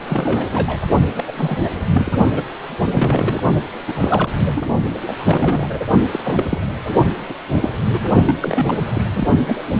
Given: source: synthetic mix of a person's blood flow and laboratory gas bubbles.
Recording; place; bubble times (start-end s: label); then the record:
Doppler ultrasound of blood flow; precordium
0.07-0.81 s: bubbles
1.15-1.24 s: bubbles
1.27-1.32 s: bubbles
1.35-1.70 s: bubbles
1.94-2.12 s: bubbles
2.31-2.43 s: bubbles
2.77-3.43 s: bubbles
3.88-4.28 s: bubbles
4.46-4.61 s: bubbles
5.06-5.14 s: bubbles
5.19-5.86 s: bubbles
6.11-6.19 s: bubbles
6.24-6.61 s: bubbles
6.88-6.93 s: bubbles
7.29-7.34 s: bubbles
7.53-7.71 s: bubbles
7.88-8.05 s: bubbles
8.25-8.37 s: bubbles
8.40-8.74 s: bubbles
8.93-9.30 s: bubbles
9.46-9.64 s: bubbles
From the record:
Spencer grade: 3 (all of the cardiac periods contain showers or single bubble signals, but not dominating or overriding the cardiac motion signals); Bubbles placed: only in the low amplitude regions of the cardiac cycle